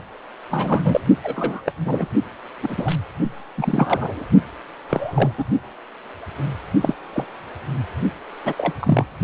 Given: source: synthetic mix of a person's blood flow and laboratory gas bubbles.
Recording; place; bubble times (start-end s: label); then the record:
Doppler ultrasound of blood flow; precordium
0.51-1.00 s: bubbles
1.22-1.61 s: bubbles
1.66-1.72 s: bubbles
1.85-2.07 s: bubbles
2.62-2.96 s: bubbles
3.57-4.26 s: bubbles
4.89-5.31 s: bubbles
5.38-5.44 s: bubbles
6.80-6.94 s: bubbles
7.12-7.26 s: bubbles
8.45-8.54 s: bubbles
8.58-8.72 s: bubbles
8.79-9.05 s: bubbles
From the record:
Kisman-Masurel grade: 232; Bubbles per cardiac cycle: several, 3 to 8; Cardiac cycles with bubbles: 50 to 99%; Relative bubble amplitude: moderate (0.250 to 0.450); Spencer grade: 3 (all of the cardiac periods contain showers or single bubble signals, but not dominating or overriding the cardiac motion signals); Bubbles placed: only in the low amplitude regions of the cardiac cycle